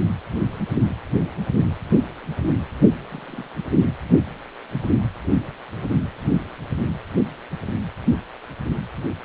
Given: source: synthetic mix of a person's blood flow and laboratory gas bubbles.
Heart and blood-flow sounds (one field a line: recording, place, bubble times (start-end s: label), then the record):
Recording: Doppler ultrasound of blood flow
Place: precordium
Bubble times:
3.10-3.47 s: bubbles
3.64-3.68 s: bubbles
From the record:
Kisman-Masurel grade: 121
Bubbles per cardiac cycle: 1 to 2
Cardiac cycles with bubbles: 10 to 50%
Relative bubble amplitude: barely perceptible (0.100 to 0.250)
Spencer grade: 2 (many but less than half of the cardiac periods contain bubble signals, singularly or in groups)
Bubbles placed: anywhere in the cardiac cycle